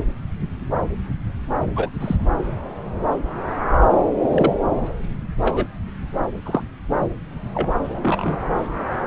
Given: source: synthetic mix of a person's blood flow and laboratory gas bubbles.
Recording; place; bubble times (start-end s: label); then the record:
Doppler ultrasound of blood flow; subclavian vein
1.75-1.90 s: bubbles
2.00-2.16 s: bubbles
4.29-4.53 s: bubbles
5.43-5.67 s: bubbles
6.45-6.61 s: bubbles
7.54-7.67 s: bubbles
7.90-8.38 s: bubbles
From the record:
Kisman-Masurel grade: 122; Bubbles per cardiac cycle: 1 to 2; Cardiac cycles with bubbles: 10 to 50%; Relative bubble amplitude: moderate (0.250 to 0.450); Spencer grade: 2 (many but less than half of the cardiac periods contain bubble signals, singularly or in groups); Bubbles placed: anywhere in the cardiac cycle